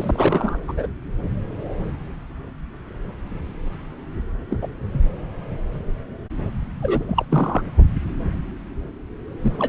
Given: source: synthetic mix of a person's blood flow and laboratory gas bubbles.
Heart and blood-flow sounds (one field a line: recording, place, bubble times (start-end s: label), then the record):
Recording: Doppler ultrasound of blood flow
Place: subclavian vein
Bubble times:
0.00-0.57 s: bubbles
0.63-0.87 s: bubbles
4.50-4.58 s: bubbles
4.62-4.68 s: bubbles
4.94-5.00 s: bubbles
6.82-7.05 s: bubbles
7.08-7.26 s: bubbles
7.30-7.62 s: bubbles
9.42-9.69 s: bubbles
From the record:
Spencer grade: 2 (many but less than half of the cardiac periods contain bubble signals, singularly or in groups)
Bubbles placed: anywhere in the cardiac cycle